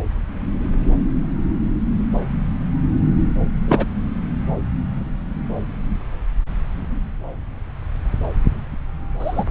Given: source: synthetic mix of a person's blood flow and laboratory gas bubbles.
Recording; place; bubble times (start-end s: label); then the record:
Doppler ultrasound of blood flow; subclavian vein
3.67-3.85 s: bubbles
9.19-9.44 s: bubbles
From the record:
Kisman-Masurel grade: 112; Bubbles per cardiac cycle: 1 to 2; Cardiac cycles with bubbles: 1 to 10%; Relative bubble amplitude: moderate (0.250 to 0.450); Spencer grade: 1 (occasional bubble signal discernible with the cardiac motion signal, with majority of cardiac periods free of bubbles); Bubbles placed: anywhere in the cardiac cycle